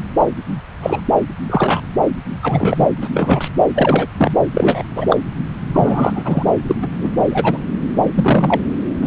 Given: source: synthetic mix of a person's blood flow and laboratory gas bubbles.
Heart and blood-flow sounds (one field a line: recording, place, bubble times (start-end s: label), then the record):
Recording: Doppler ultrasound of blood flow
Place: subclavian vein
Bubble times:
0.82-1.01 s: bubbles
1.50-1.81 s: bubbles
2.42-2.87 s: bubbles
3.01-3.09 s: bubbles
3.14-3.48 s: bubbles
3.74-4.07 s: bubbles
4.18-4.33 s: bubbles
4.54-4.83 s: bubbles
4.96-5.06 s: bubbles
5.09-5.17 s: bubbles
5.73-6.53 s: bubbles
6.67-6.75 s: bubbles
6.81-6.88 s: bubbles
7.00-7.08 s: bubbles
7.30-7.58 s: bubbles
8.15-8.62 s: bubbles
9.02-9.07 s: bubbles
From the record:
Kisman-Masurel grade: 243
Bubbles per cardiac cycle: several, 3 to 8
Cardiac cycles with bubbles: 100%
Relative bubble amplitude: loud (0.450 to 0.775)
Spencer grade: 3 (all of the cardiac periods contain showers or single bubble signals, but not dominating or overriding the cardiac motion signals)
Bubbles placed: anywhere in the cardiac cycle